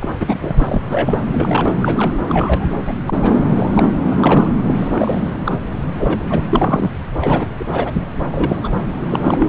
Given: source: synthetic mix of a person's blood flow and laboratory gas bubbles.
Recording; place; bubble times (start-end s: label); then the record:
Doppler ultrasound of blood flow; subclavian vein
0.00-0.08 s: bubbles
0.19-0.81 s: bubbles
0.89-1.22 s: bubbles
1.31-1.74 s: bubbles
1.82-2.12 s: bubbles
2.28-2.69 s: bubbles
2.86-2.93 s: bubbles
3.06-3.38 s: bubbles
3.48-3.89 s: bubbles
4.09-4.50 s: bubbles
4.76-5.30 s: bubbles
5.46-5.57 s: bubbles
5.97-6.44 s: bubbles
6.50-6.91 s: bubbles
7.21-7.51 s: bubbles
7.59-7.65 s: bubbles
7.72-7.91 s: bubbles
8.32-8.57 s: bubbles
8.63-8.71 s: bubbles
9.03-9.46 s: bubbles
From the record:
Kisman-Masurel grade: 243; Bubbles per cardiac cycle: several, 3 to 8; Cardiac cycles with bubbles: 100%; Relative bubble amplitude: loud (0.450 to 0.775); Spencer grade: 3 (all of the cardiac periods contain showers or single bubble signals, but not dominating or overriding the cardiac motion signals); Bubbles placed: anywhere in the cardiac cycle